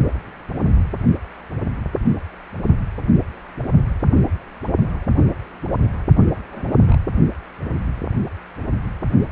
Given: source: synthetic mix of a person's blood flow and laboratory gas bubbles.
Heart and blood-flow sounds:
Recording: Doppler ultrasound of blood flow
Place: precordium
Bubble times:
6.51-6.77 s: bubbles
6.84-6.96 s: bubbles
From the record:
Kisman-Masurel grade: 111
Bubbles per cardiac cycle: 1 to 2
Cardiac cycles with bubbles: 1 to 10%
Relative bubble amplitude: barely perceptible (0.100 to 0.250)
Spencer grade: 1 (occasional bubble signal discernible with the cardiac motion signal, with majority of cardiac periods free of bubbles)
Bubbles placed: only in the low amplitude regions of the cardiac cycle

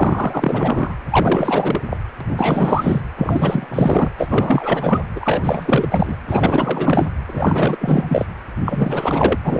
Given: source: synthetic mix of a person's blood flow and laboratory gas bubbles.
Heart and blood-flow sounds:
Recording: Doppler ultrasound of blood flow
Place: precordium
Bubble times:
0.00-0.95 s: bubbles
1.10-1.80 s: bubbles
1.90-1.97 s: bubbles
2.20-2.25 s: bubbles
2.29-3.02 s: bubbles
3.18-4.10 s: bubbles
4.17-5.03 s: bubbles
5.15-6.17 s: bubbles
6.27-7.09 s: bubbles
7.27-8.26 s: bubbles
8.66-9.38 s: bubbles
9.44-9.60 s: bubbles
From the record:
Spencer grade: 4 (maximum detectable bubble signal sounding continuously throughout systole and diastole of every cardiac period, and overriding the amplitude of the normal cardiac signals)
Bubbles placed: anywhere in the cardiac cycle

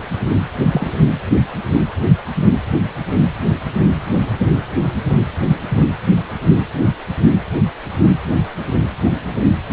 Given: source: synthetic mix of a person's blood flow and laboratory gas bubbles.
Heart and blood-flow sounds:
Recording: Doppler ultrasound of blood flow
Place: precordium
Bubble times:
0.72-0.93 s: bubbles
From the record:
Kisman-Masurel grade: 113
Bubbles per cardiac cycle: 1 to 2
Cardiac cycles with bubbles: 1 to 10%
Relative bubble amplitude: loud (0.450 to 0.775)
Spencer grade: 1 (occasional bubble signal discernible with the cardiac motion signal, with majority of cardiac periods free of bubbles)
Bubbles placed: anywhere in the cardiac cycle

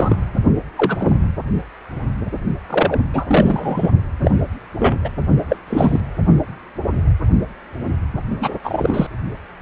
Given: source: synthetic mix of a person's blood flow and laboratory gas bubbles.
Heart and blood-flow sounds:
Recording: Doppler ultrasound of blood flow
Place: precordium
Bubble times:
0.00-0.16 s: bubbles
0.76-1.14 s: bubbles
2.69-3.00 s: bubbles
3.13-3.91 s: bubbles
4.21-4.31 s: bubbles
4.79-4.96 s: bubbles
5.04-5.09 s: bubbles
5.49-5.56 s: bubbles
5.67-6.00 s: bubbles
8.40-8.53 s: bubbles
8.63-9.07 s: bubbles
From the record:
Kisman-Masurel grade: 233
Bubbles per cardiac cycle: several, 3 to 8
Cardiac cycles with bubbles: 50 to 99%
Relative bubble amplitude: loud (0.450 to 0.775)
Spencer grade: 3 (all of the cardiac periods contain showers or single bubble signals, but not dominating or overriding the cardiac motion signals)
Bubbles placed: only in the low amplitude regions of the cardiac cycle

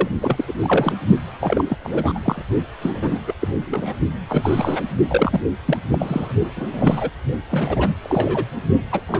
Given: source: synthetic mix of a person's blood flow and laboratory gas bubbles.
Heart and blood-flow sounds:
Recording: Doppler ultrasound of blood flow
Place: precordium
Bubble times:
0.00-0.08 s: bubbles
0.21-0.45 s: bubbles
0.47-0.54 s: bubbles
0.62-0.94 s: bubbles
1.40-1.63 s: bubbles
1.70-1.77 s: bubbles
1.84-2.20 s: bubbles
2.22-2.42 s: bubbles
2.82-3.22 s: bubbles
3.27-3.34 s: bubbles
3.41-3.96 s: bubbles
4.29-4.83 s: bubbles
5.08-5.40 s: bubbles
5.65-5.77 s: bubbles
5.90-6.36 s: bubbles
6.56-6.67 s: bubbles
6.72-7.10 s: bubbles
7.50-7.95 s: bubbles
8.04-8.45 s: bubbles
8.91-9.00 s: bubbles
9.08-9.20 s: bubbles
From the record:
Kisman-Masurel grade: 332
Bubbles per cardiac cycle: rolling drumbeat, 9 or more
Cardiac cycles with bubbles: 50 to 99%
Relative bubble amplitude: moderate (0.250 to 0.450)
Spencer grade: 3 (all of the cardiac periods contain showers or single bubble signals, but not dominating or overriding the cardiac motion signals)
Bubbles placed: only in the low amplitude regions of the cardiac cycle

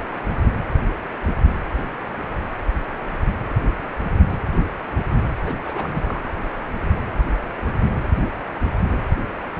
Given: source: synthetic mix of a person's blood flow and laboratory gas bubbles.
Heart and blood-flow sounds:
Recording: Doppler ultrasound of blood flow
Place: precordium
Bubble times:
5.43-5.58 s: bubbles
5.65-6.22 s: bubbles
From the record:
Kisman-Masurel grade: 211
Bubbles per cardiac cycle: several, 3 to 8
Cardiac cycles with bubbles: 1 to 10%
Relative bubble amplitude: barely perceptible (0.100 to 0.250)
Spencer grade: 1 (occasional bubble signal discernible with the cardiac motion signal, with majority of cardiac periods free of bubbles)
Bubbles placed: anywhere in the cardiac cycle

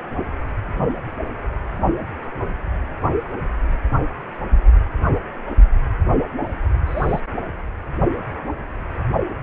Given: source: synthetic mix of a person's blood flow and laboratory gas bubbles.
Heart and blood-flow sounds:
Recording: Doppler ultrasound of blood flow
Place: precordium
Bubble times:
6.86-7.20 s: bubbles
From the record:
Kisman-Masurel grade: 111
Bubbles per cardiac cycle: 1 to 2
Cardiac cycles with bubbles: 1 to 10%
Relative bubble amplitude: barely perceptible (0.100 to 0.250)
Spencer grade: 1 (occasional bubble signal discernible with the cardiac motion signal, with majority of cardiac periods free of bubbles)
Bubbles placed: only in the low amplitude regions of the cardiac cycle

